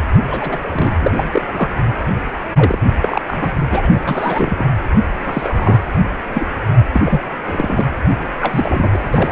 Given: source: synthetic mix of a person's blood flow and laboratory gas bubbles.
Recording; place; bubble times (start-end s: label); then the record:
Doppler ultrasound of blood flow; precordium
0.30-0.59 s: bubbles
0.68-0.92 s: bubbles
1.00-1.11 s: bubbles
1.15-1.24 s: bubbles
1.31-1.45 s: bubbles
1.54-1.69 s: bubbles
2.56-2.79 s: bubbles
2.81-2.86 s: bubbles
3.00-3.22 s: bubbles
3.27-3.57 s: bubbles
3.71-3.98 s: bubbles
4.07-4.64 s: bubbles
5.25-5.79 s: bubbles
6.33-6.46 s: bubbles
6.92-7.02 s: bubbles
7.04-7.21 s: bubbles
7.46-7.86 s: bubbles
8.41-8.97 s: bubbles
9.12-9.32 s: bubbles
From the record:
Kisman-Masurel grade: 242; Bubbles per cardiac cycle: several, 3 to 8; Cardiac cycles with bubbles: 100%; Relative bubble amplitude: moderate (0.250 to 0.450); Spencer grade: 3 (all of the cardiac periods contain showers or single bubble signals, but not dominating or overriding the cardiac motion signals); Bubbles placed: anywhere in the cardiac cycle